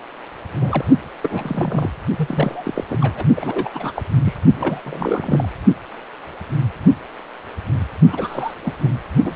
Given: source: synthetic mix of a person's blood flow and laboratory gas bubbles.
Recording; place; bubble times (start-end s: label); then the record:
Doppler ultrasound of blood flow; precordium
0.61-0.84 s: bubbles
1.23-1.91 s: bubbles
2.17-2.84 s: bubbles
2.88-2.98 s: bubbles
3.01-3.25 s: bubbles
3.36-3.69 s: bubbles
3.71-3.92 s: bubbles
3.95-4.04 s: bubbles
4.25-4.34 s: bubbles
4.54-4.80 s: bubbles
4.84-5.49 s: bubbles
8.10-8.54 s: bubbles
8.63-8.74 s: bubbles
8.82-8.90 s: bubbles
9.21-9.36 s: bubbles
From the record:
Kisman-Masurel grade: 332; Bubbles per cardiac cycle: rolling drumbeat, 9 or more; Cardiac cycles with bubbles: 50 to 99%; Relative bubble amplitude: moderate (0.250 to 0.450); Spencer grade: 3 (all of the cardiac periods contain showers or single bubble signals, but not dominating or overriding the cardiac motion signals); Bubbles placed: only in the low amplitude regions of the cardiac cycle